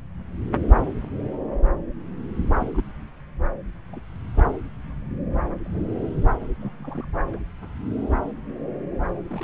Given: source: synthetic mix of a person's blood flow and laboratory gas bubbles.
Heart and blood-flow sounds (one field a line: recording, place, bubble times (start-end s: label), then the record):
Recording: Doppler ultrasound of blood flow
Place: subclavian vein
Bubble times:
2.59-2.67 s: bubbles
2.72-2.85 s: bubbles
3.92-4.00 s: bubbles
5.64-5.82 s: bubbles
6.60-6.72 s: bubbles
6.79-7.05 s: bubbles
7.31-7.43 s: bubbles
9.28-9.44 s: bubbles
From the record:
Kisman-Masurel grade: 121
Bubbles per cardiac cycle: 1 to 2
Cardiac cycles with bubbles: 10 to 50%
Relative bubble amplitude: barely perceptible (0.100 to 0.250)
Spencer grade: 2 (many but less than half of the cardiac periods contain bubble signals, singularly or in groups)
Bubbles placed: anywhere in the cardiac cycle